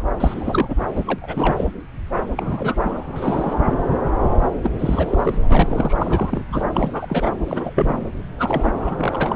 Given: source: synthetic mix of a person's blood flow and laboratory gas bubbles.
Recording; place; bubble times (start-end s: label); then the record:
Doppler ultrasound of blood flow; subclavian vein
0.20-0.75 s: bubbles
0.95-1.04 s: bubbles
1.07-1.19 s: bubbles
1.21-1.67 s: bubbles
2.17-2.27 s: bubbles
2.37-3.03 s: bubbles
3.15-3.55 s: bubbles
3.58-3.76 s: bubbles
4.31-4.39 s: bubbles
4.62-4.71 s: bubbles
4.79-5.42 s: bubbles
5.50-5.96 s: bubbles
6.00-6.43 s: bubbles
6.52-6.63 s: bubbles
6.71-7.30 s: bubbles
7.45-8.09 s: bubbles
8.39-9.36 s: bubbles
From the record:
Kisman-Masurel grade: 342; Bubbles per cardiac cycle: rolling drumbeat, 9 or more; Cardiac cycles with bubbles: 100%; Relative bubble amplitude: moderate (0.250 to 0.450); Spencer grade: 3 (all of the cardiac periods contain showers or single bubble signals, but not dominating or overriding the cardiac motion signals); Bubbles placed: anywhere in the cardiac cycle